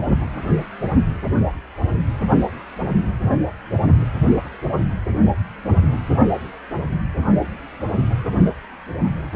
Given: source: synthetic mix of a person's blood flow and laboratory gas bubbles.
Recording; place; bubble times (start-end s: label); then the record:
Doppler ultrasound of blood flow; precordium
no bubbles
From the record:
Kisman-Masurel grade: 000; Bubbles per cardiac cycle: 0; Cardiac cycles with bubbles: 0%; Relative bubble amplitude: no bubbles discernible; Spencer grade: 0 (complete lack of bubble signals)